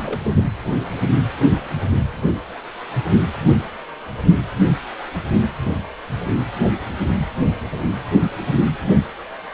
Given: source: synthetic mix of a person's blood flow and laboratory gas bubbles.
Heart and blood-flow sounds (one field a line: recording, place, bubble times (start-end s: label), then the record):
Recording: Doppler ultrasound of blood flow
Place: precordium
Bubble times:
0.00-0.43 s: bubbles
From the record:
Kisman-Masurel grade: 211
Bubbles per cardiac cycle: several, 3 to 8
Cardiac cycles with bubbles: 1 to 10%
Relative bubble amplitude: barely perceptible (0.100 to 0.250)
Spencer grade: 1 (occasional bubble signal discernible with the cardiac motion signal, with majority of cardiac periods free of bubbles)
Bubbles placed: anywhere in the cardiac cycle